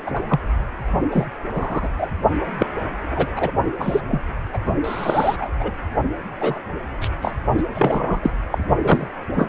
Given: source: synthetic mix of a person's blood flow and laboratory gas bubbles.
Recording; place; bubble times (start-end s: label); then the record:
Doppler ultrasound of blood flow; precordium
0.06-0.23 s: bubbles
0.28-0.40 s: bubbles
1.11-1.26 s: bubbles
1.53-1.89 s: bubbles
1.98-2.07 s: bubbles
2.40-2.46 s: bubbles
2.57-2.66 s: bubbles
3.10-3.27 s: bubbles
3.35-3.52 s: bubbles
3.79-4.00 s: bubbles
4.08-4.23 s: bubbles
4.53-4.58 s: bubbles
4.84-5.49 s: bubbles
5.59-5.71 s: bubbles
6.39-6.58 s: bubbles
7.01-7.09 s: bubbles
7.21-7.34 s: bubbles
7.58-7.63 s: bubbles
7.74-8.32 s: bubbles
8.51-8.58 s: bubbles
8.82-9.07 s: bubbles
9.36-9.47 s: bubbles
From the record:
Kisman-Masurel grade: 243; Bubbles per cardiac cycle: several, 3 to 8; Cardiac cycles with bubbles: 100%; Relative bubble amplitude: loud (0.450 to 0.775); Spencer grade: 3 (all of the cardiac periods contain showers or single bubble signals, but not dominating or overriding the cardiac motion signals); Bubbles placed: only in the low amplitude regions of the cardiac cycle